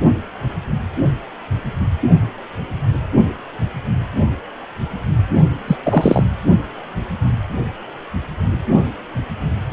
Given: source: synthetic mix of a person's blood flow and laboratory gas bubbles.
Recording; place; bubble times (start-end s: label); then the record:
Doppler ultrasound of blood flow; precordium
5.67-5.77 s: bubbles
5.83-6.24 s: bubbles
From the record:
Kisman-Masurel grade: 223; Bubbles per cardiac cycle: several, 3 to 8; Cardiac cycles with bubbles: 10 to 50%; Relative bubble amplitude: loud (0.450 to 0.775); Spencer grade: 2 (many but less than half of the cardiac periods contain bubble signals, singularly or in groups); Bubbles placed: only in the low amplitude regions of the cardiac cycle